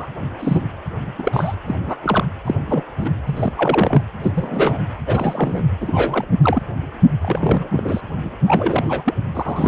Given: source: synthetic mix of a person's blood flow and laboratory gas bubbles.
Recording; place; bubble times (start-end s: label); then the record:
Doppler ultrasound of blood flow; precordium
0.00-0.07 s: bubbles
0.39-0.66 s: bubbles
1.18-1.56 s: bubbles
1.65-1.79 s: bubbles
1.87-1.97 s: bubbles
2.02-2.25 s: bubbles
2.44-2.54 s: bubbles
2.67-2.83 s: bubbles
2.98-3.10 s: bubbles
3.25-3.51 s: bubbles
3.57-4.02 s: bubbles
4.21-4.31 s: bubbles
4.34-4.79 s: bubbles
5.06-5.64 s: bubbles
5.80-6.25 s: bubbles
6.42-6.62 s: bubbles
7.21-7.69 s: bubbles
7.71-8.01 s: bubbles
8.24-8.29 s: bubbles
8.47-9.14 s: bubbles
9.34-9.68 s: bubbles
From the record:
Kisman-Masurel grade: 242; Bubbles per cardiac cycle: several, 3 to 8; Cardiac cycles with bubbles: 100%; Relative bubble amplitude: moderate (0.250 to 0.450); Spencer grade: 3 (all of the cardiac periods contain showers or single bubble signals, but not dominating or overriding the cardiac motion signals); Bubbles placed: anywhere in the cardiac cycle